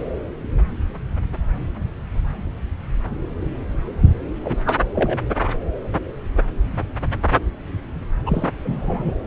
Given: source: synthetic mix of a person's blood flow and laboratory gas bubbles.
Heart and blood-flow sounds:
Doppler ultrasound of blood flow; subclavian vein
4.43-4.58 s: bubbles
4.65-4.78 s: bubbles
4.95-5.18 s: bubbles
8.25-8.49 s: bubbles
8.63-9.12 s: bubbles
From the record:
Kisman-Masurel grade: 222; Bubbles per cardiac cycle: several, 3 to 8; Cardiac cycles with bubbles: 10 to 50%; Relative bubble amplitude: moderate (0.250 to 0.450); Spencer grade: 2 (many but less than half of the cardiac periods contain bubble signals, singularly or in groups); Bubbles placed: anywhere in the cardiac cycle

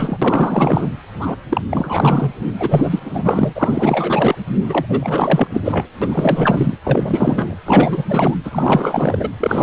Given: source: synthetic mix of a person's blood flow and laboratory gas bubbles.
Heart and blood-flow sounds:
Doppler ultrasound of blood flow; precordium
0.00-0.18 s: bubbles
0.21-0.89 s: bubbles
1.19-1.36 s: bubbles
1.49-1.61 s: bubbles
1.71-2.30 s: bubbles
2.59-4.35 s: bubbles
4.69-4.86 s: bubbles
4.88-5.62 s: bubbles
5.64-5.86 s: bubbles
6.01-6.75 s: bubbles
6.84-7.55 s: bubbles
7.65-8.05 s: bubbles
8.09-8.36 s: bubbles
8.44-9.29 s: bubbles
9.40-9.63 s: bubbles
From the record:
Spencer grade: 4 (maximum detectable bubble signal sounding continuously throughout systole and diastole of every cardiac period, and overriding the amplitude of the normal cardiac signals); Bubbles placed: anywhere in the cardiac cycle

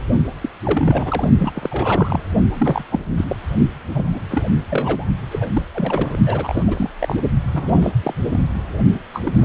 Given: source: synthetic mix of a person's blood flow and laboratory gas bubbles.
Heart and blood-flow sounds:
Doppler ultrasound of blood flow; precordium
0.40-0.50 s: bubbles
0.64-1.28 s: bubbles
1.39-1.52 s: bubbles
1.55-2.19 s: bubbles
2.54-2.85 s: bubbles
2.91-3.00 s: bubbles
3.17-3.25 s: bubbles
3.27-3.36 s: bubbles
3.87-4.05 s: bubbles
4.12-4.20 s: bubbles
4.30-4.45 s: bubbles
4.70-5.07 s: bubbles
5.31-5.50 s: bubbles
5.53-5.62 s: bubbles
5.75-6.17 s: bubbles
6.26-6.89 s: bubbles
6.99-7.15 s: bubbles
7.51-7.92 s: bubbles
8.03-8.14 s: bubbles
8.30-8.41 s: bubbles
9.12-9.45 s: bubbles
From the record:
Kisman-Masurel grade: 342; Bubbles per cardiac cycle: rolling drumbeat, 9 or more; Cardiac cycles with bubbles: 100%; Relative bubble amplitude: moderate (0.250 to 0.450); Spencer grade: 3 (all of the cardiac periods contain showers or single bubble signals, but not dominating or overriding the cardiac motion signals); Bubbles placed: only in the low amplitude regions of the cardiac cycle

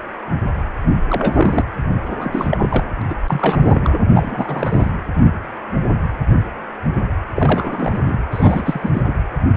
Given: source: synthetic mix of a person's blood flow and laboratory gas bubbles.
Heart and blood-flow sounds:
Doppler ultrasound of blood flow; precordium
1.08-1.64 s: bubbles
2.18-2.85 s: bubbles
3.02-3.05 s: bubbles
3.09-3.14 s: bubbles
3.27-3.99 s: bubbles
4.14-4.92 s: bubbles
7.35-8.20 s: bubbles
8.31-9.14 s: bubbles
From the record:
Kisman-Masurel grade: 332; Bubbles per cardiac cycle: rolling drumbeat, 9 or more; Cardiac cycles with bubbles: 50 to 99%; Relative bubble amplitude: moderate (0.250 to 0.450); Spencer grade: 3 (all of the cardiac periods contain showers or single bubble signals, but not dominating or overriding the cardiac motion signals); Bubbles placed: anywhere in the cardiac cycle

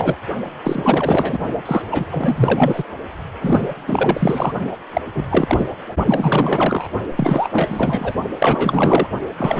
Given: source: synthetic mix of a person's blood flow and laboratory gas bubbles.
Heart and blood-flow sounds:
Doppler ultrasound of blood flow; precordium
0.00-0.15 s: bubbles
0.64-1.38 s: bubbles
1.66-1.82 s: bubbles
1.91-2.07 s: bubbles
2.10-2.83 s: bubbles
3.41-3.74 s: bubbles
3.86-4.54 s: bubbles
4.70-4.77 s: bubbles
4.93-5.01 s: bubbles
5.14-5.25 s: bubbles
5.29-5.67 s: bubbles
6.05-6.88 s: bubbles
7.15-8.15 s: bubbles
8.40-9.08 s: bubbles
9.37-9.60 s: bubbles
From the record:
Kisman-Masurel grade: 444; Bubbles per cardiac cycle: continuous sound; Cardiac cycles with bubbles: 100%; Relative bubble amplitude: maximal (0.775 to 0.999); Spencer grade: 4 (maximum detectable bubble signal sounding continuously throughout systole and diastole of every cardiac period, and overriding the amplitude of the normal cardiac signals); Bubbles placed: only in the low amplitude regions of the cardiac cycle

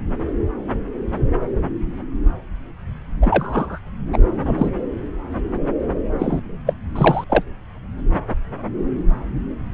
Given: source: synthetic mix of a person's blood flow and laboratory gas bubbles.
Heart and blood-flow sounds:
Doppler ultrasound of blood flow; subclavian vein
3.22-3.79 s: bubbles
4.12-4.19 s: bubbles
4.45-4.70 s: bubbles
6.19-6.42 s: bubbles
6.66-6.74 s: bubbles
6.95-7.24 s: bubbles
7.29-7.43 s: bubbles
From the record:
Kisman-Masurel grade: 223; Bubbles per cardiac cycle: several, 3 to 8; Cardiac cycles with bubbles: 10 to 50%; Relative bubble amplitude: loud (0.450 to 0.775); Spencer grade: 2 (many but less than half of the cardiac periods contain bubble signals, singularly or in groups); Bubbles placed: anywhere in the cardiac cycle

